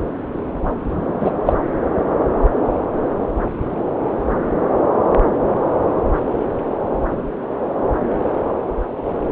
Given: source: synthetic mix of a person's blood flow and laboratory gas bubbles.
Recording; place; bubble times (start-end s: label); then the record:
Doppler ultrasound of blood flow; subclavian vein
1.20-1.31 s: bubbles
1.46-1.53 s: bubbles
From the record:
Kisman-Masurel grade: 113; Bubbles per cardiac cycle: 1 to 2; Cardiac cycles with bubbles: 1 to 10%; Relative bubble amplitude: loud (0.450 to 0.775); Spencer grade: 1 (occasional bubble signal discernible with the cardiac motion signal, with majority of cardiac periods free of bubbles); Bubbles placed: anywhere in the cardiac cycle